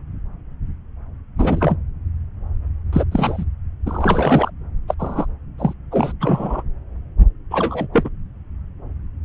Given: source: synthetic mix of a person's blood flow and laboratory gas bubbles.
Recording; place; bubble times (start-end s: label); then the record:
Doppler ultrasound of blood flow; subclavian vein
1.38-1.76 s: bubbles
2.92-3.04 s: bubbles
3.11-3.45 s: bubbles
3.85-4.50 s: bubbles
4.88-4.94 s: bubbles
4.99-5.26 s: bubbles
5.58-5.73 s: bubbles
5.91-6.12 s: bubbles
6.20-6.63 s: bubbles
7.50-7.88 s: bubbles
7.93-8.10 s: bubbles
From the record:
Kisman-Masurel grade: 223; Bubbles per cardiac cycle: several, 3 to 8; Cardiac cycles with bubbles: 10 to 50%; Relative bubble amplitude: loud (0.450 to 0.775); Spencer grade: 2 (many but less than half of the cardiac periods contain bubble signals, singularly or in groups); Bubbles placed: anywhere in the cardiac cycle